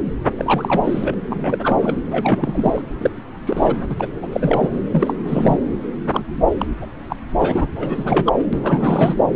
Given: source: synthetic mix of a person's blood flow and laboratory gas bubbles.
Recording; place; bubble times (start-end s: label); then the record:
Doppler ultrasound of blood flow; subclavian vein
0.37-1.14 s: bubbles
1.29-1.78 s: bubbles
1.80-1.96 s: bubbles
2.06-2.82 s: bubbles
2.99-3.10 s: bubbles
3.46-3.96 s: bubbles
4.00-4.07 s: bubbles
4.22-4.28 s: bubbles
4.32-4.69 s: bubbles
4.92-5.13 s: bubbles
5.25-5.59 s: bubbles
6.12-6.21 s: bubbles
6.58-6.67 s: bubbles
6.81-6.86 s: bubbles
7.09-7.16 s: bubbles
7.39-7.67 s: bubbles
7.76-8.46 s: bubbles
8.53-9.15 s: bubbles
From the record:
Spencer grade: 3 (all of the cardiac periods contain showers or single bubble signals, but not dominating or overriding the cardiac motion signals); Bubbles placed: anywhere in the cardiac cycle